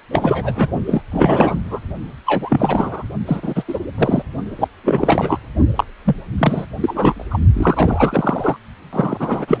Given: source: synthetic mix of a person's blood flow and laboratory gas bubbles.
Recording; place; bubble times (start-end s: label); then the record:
Doppler ultrasound of blood flow; precordium
0.12-0.52 s: bubbles
0.56-0.69 s: bubbles
0.86-1.01 s: bubbles
1.11-1.60 s: bubbles
1.64-1.80 s: bubbles
2.26-3.03 s: bubbles
3.26-3.63 s: bubbles
3.67-3.79 s: bubbles
3.97-4.22 s: bubbles
4.58-4.68 s: bubbles
4.83-5.39 s: bubbles
5.75-5.84 s: bubbles
6.05-6.15 s: bubbles
6.38-6.65 s: bubbles
6.79-7.26 s: bubbles
7.30-7.38 s: bubbles
7.54-8.56 s: bubbles
8.92-9.60 s: bubbles
From the record:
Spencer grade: 3 (all of the cardiac periods contain showers or single bubble signals, but not dominating or overriding the cardiac motion signals); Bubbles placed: only in the low amplitude regions of the cardiac cycle